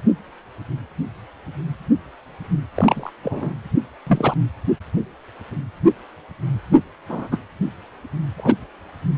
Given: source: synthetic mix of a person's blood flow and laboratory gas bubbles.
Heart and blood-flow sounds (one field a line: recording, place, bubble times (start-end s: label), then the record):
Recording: Doppler ultrasound of blood flow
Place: precordium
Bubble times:
2.75-3.10 s: bubbles
3.23-3.54 s: bubbles
4.07-4.34 s: bubbles
7.09-7.28 s: bubbles
7.32-7.38 s: bubbles
8.38-8.56 s: bubbles
From the record:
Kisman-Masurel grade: 122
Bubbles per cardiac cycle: 1 to 2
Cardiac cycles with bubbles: 10 to 50%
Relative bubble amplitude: moderate (0.250 to 0.450)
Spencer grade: 2 (many but less than half of the cardiac periods contain bubble signals, singularly or in groups)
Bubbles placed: only in the low amplitude regions of the cardiac cycle